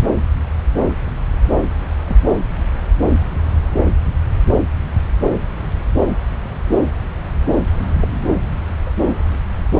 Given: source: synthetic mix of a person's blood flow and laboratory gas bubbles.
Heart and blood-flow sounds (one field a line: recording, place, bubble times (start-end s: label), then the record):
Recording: Doppler ultrasound of blood flow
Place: subclavian vein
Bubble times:
2.05-2.19 s: bubbles
8.01-8.07 s: bubbles
8.86-8.91 s: bubbles
From the record:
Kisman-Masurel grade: 121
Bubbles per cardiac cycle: 1 to 2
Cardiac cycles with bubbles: 10 to 50%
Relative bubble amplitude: barely perceptible (0.100 to 0.250)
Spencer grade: 2 (many but less than half of the cardiac periods contain bubble signals, singularly or in groups)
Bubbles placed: anywhere in the cardiac cycle